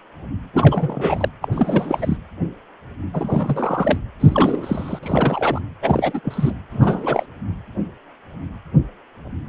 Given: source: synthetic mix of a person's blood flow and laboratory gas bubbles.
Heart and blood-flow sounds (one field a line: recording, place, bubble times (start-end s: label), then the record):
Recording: Doppler ultrasound of blood flow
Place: precordium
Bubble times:
0.53-1.28 s: bubbles
1.42-1.49 s: bubbles
1.51-2.17 s: bubbles
3.13-3.98 s: bubbles
4.20-4.99 s: bubbles
5.03-5.62 s: bubbles
5.82-6.20 s: bubbles
6.24-6.55 s: bubbles
6.71-7.26 s: bubbles
From the record:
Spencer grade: 3 (all of the cardiac periods contain showers or single bubble signals, but not dominating or overriding the cardiac motion signals)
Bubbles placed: anywhere in the cardiac cycle